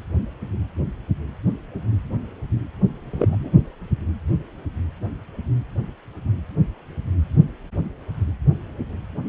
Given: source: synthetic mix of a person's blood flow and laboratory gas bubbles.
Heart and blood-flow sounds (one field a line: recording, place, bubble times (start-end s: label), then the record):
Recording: Doppler ultrasound of blood flow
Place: precordium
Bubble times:
3.11-3.51 s: bubbles
From the record:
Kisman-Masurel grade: 112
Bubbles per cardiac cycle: 1 to 2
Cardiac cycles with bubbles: 1 to 10%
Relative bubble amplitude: moderate (0.250 to 0.450)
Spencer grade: 1 (occasional bubble signal discernible with the cardiac motion signal, with majority of cardiac periods free of bubbles)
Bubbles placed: only in the low amplitude regions of the cardiac cycle